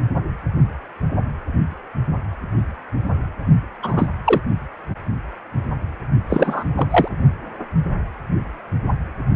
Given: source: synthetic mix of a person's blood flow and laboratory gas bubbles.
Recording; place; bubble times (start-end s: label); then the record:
Doppler ultrasound of blood flow; precordium
3.83-4.07 s: bubbles
4.25-4.41 s: bubbles
6.29-6.65 s: bubbles
6.75-6.88 s: bubbles
6.91-7.08 s: bubbles
From the record:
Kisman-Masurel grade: 223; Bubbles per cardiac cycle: several, 3 to 8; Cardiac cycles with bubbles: 10 to 50%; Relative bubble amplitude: loud (0.450 to 0.775); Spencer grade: 2 (many but less than half of the cardiac periods contain bubble signals, singularly or in groups); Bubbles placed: only in the low amplitude regions of the cardiac cycle